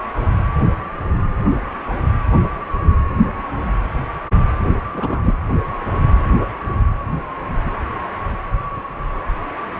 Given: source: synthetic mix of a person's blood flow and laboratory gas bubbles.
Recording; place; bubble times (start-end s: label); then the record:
Doppler ultrasound of blood flow; precordium
4.93-5.33 s: bubbles
From the record:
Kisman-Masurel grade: 113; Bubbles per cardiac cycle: 1 to 2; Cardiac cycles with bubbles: 1 to 10%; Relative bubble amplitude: loud (0.450 to 0.775); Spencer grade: 1 (occasional bubble signal discernible with the cardiac motion signal, with majority of cardiac periods free of bubbles); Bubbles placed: anywhere in the cardiac cycle